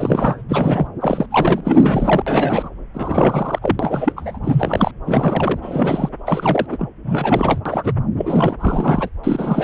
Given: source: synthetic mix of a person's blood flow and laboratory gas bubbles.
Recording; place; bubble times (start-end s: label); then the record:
Doppler ultrasound of blood flow; subclavian vein
0.00-0.41 s: bubbles
0.49-0.92 s: bubbles
1.00-1.26 s: bubbles
1.30-1.60 s: bubbles
1.64-2.23 s: bubbles
2.27-2.69 s: bubbles
2.94-3.59 s: bubbles
3.61-4.12 s: bubbles
4.17-4.38 s: bubbles
4.43-4.91 s: bubbles
5.04-6.09 s: bubbles
6.25-6.66 s: bubbles
6.68-6.88 s: bubbles
7.04-7.61 s: bubbles
7.65-7.93 s: bubbles
8.18-8.56 s: bubbles
8.60-9.09 s: bubbles
9.23-9.64 s: bubbles
From the record:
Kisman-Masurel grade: 342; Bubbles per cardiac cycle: rolling drumbeat, 9 or more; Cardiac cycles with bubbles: 100%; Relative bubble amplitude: moderate (0.250 to 0.450); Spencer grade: 3 (all of the cardiac periods contain showers or single bubble signals, but not dominating or overriding the cardiac motion signals); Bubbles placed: anywhere in the cardiac cycle